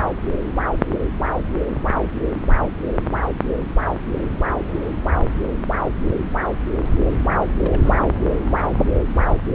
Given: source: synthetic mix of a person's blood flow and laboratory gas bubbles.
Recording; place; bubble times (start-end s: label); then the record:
Doppler ultrasound of blood flow; subclavian vein
7.58-7.98 s: bubbles
From the record:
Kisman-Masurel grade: 211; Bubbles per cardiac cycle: several, 3 to 8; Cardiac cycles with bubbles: 1 to 10%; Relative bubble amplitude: barely perceptible (0.100 to 0.250); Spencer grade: 1 (occasional bubble signal discernible with the cardiac motion signal, with majority of cardiac periods free of bubbles); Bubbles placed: anywhere in the cardiac cycle